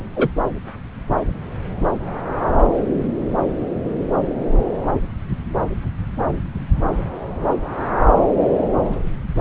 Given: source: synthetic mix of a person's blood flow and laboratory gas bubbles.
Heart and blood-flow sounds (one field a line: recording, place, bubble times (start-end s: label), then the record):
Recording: Doppler ultrasound of blood flow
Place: subclavian vein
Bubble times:
0.16-0.29 s: bubbles
From the record:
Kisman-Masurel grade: 113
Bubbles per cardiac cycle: 1 to 2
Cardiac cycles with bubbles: 1 to 10%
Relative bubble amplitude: loud (0.450 to 0.775)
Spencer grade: 1 (occasional bubble signal discernible with the cardiac motion signal, with majority of cardiac periods free of bubbles)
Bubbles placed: anywhere in the cardiac cycle